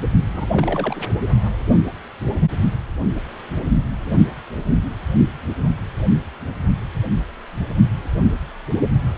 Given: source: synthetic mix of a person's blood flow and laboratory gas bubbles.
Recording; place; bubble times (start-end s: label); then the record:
Doppler ultrasound of blood flow; precordium
0.33-0.49 s: bubbles
0.52-1.07 s: bubbles
From the record:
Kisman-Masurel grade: 211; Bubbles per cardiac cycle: several, 3 to 8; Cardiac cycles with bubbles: 1 to 10%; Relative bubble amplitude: barely perceptible (0.100 to 0.250); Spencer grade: 1 (occasional bubble signal discernible with the cardiac motion signal, with majority of cardiac periods free of bubbles); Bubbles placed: only in the low amplitude regions of the cardiac cycle